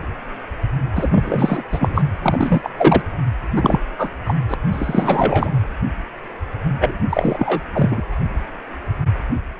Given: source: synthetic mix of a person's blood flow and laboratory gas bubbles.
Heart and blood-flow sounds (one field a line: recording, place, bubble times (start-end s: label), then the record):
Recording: Doppler ultrasound of blood flow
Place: precordium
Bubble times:
0.96-1.63 s: bubbles
1.72-2.04 s: bubbles
2.22-2.70 s: bubbles
2.77-3.02 s: bubbles
3.56-3.80 s: bubbles
3.98-4.09 s: bubbles
4.25-4.34 s: bubbles
4.48-4.54 s: bubbles
4.72-5.51 s: bubbles
6.80-6.98 s: bubbles
7.09-7.63 s: bubbles
7.74-8.02 s: bubbles
From the record:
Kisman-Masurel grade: 333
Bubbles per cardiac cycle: rolling drumbeat, 9 or more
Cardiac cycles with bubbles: 50 to 99%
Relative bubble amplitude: loud (0.450 to 0.775)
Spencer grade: 3 (all of the cardiac periods contain showers or single bubble signals, but not dominating or overriding the cardiac motion signals)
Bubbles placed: anywhere in the cardiac cycle